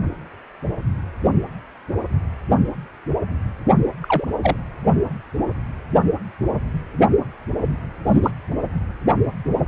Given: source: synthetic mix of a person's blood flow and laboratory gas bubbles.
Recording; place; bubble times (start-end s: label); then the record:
Doppler ultrasound of blood flow; precordium
4.01-4.25 s: bubbles
4.43-4.57 s: bubbles
8.05-8.31 s: bubbles
From the record:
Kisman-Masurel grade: 122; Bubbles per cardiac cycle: 1 to 2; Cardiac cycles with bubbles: 10 to 50%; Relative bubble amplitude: moderate (0.250 to 0.450); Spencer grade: 2 (many but less than half of the cardiac periods contain bubble signals, singularly or in groups); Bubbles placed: only in the low amplitude regions of the cardiac cycle